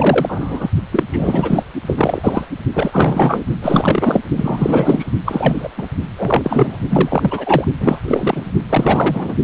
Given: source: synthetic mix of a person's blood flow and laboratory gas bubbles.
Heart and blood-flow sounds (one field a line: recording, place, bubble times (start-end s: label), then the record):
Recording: Doppler ultrasound of blood flow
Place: precordium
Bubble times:
0.00-0.70 s: bubbles
0.92-1.03 s: bubbles
1.10-1.63 s: bubbles
1.86-1.94 s: bubbles
1.97-2.45 s: bubbles
2.74-3.45 s: bubbles
3.62-4.21 s: bubbles
4.36-5.12 s: bubbles
5.25-5.70 s: bubbles
5.77-5.86 s: bubbles
6.17-6.78 s: bubbles
6.89-7.64 s: bubbles
7.79-8.02 s: bubbles
8.07-8.52 s: bubbles
8.70-9.36 s: bubbles
From the record:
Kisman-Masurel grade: 343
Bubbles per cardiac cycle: rolling drumbeat, 9 or more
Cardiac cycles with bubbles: 100%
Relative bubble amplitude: loud (0.450 to 0.775)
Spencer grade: 3 (all of the cardiac periods contain showers or single bubble signals, but not dominating or overriding the cardiac motion signals)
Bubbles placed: only in the low amplitude regions of the cardiac cycle